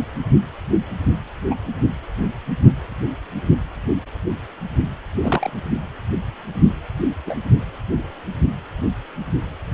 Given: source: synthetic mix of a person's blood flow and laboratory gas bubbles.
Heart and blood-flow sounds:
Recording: Doppler ultrasound of blood flow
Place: precordium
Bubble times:
1.50-1.55 s: bubbles
5.22-5.50 s: bubbles
7.25-7.36 s: bubbles
From the record:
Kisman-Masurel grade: 122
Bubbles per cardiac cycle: 1 to 2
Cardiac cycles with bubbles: 10 to 50%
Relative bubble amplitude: moderate (0.250 to 0.450)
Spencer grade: 2 (many but less than half of the cardiac periods contain bubble signals, singularly or in groups)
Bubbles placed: anywhere in the cardiac cycle

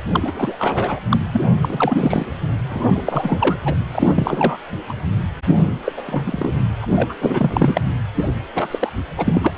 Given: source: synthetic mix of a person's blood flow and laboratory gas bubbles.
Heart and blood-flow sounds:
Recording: Doppler ultrasound of blood flow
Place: precordium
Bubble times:
0.12-0.56 s: bubbles
0.59-0.99 s: bubbles
1.09-1.20 s: bubbles
1.33-1.42 s: bubbles
1.62-2.26 s: bubbles
2.69-3.02 s: bubbles
3.06-3.56 s: bubbles
3.65-3.75 s: bubbles
3.92-4.57 s: bubbles
4.88-4.93 s: bubbles
5.47-5.78 s: bubbles
5.84-5.92 s: bubbles
5.96-6.02 s: bubbles
6.06-6.23 s: bubbles
6.26-6.52 s: bubbles
6.81-6.85 s: bubbles
6.95-7.14 s: bubbles
7.21-7.83 s: bubbles
8.14-8.29 s: bubbles
8.54-8.67 s: bubbles
8.71-8.92 s: bubbles
9.17-9.52 s: bubbles
From the record:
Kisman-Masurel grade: 333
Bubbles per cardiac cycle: rolling drumbeat, 9 or more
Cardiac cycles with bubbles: 50 to 99%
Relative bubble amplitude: loud (0.450 to 0.775)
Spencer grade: 3 (all of the cardiac periods contain showers or single bubble signals, but not dominating or overriding the cardiac motion signals)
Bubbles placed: anywhere in the cardiac cycle

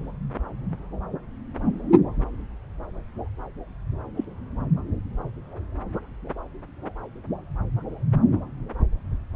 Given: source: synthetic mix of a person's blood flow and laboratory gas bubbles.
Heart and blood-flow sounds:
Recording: Doppler ultrasound of blood flow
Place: subclavian vein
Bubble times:
4.17-4.25 s: bubbles
From the record:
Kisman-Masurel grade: 121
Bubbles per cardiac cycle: 1 to 2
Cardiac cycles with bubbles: 10 to 50%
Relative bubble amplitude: barely perceptible (0.100 to 0.250)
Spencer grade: 2 (many but less than half of the cardiac periods contain bubble signals, singularly or in groups)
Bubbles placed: anywhere in the cardiac cycle

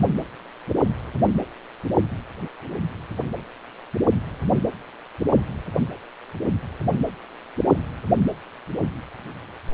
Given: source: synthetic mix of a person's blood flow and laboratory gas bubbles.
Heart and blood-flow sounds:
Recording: Doppler ultrasound of blood flow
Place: precordium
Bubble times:
no bubbles
From the record:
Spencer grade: 0 (complete lack of bubble signals)

